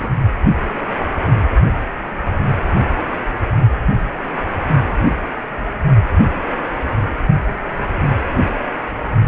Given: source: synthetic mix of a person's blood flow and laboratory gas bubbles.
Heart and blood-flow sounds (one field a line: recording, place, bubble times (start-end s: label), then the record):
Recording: Doppler ultrasound of blood flow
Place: precordium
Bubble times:
0.00-0.08 s: bubbles
From the record:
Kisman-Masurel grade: 212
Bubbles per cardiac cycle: several, 3 to 8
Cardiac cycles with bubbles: 1 to 10%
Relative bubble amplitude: moderate (0.250 to 0.450)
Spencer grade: 1 (occasional bubble signal discernible with the cardiac motion signal, with majority of cardiac periods free of bubbles)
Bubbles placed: only in the low amplitude regions of the cardiac cycle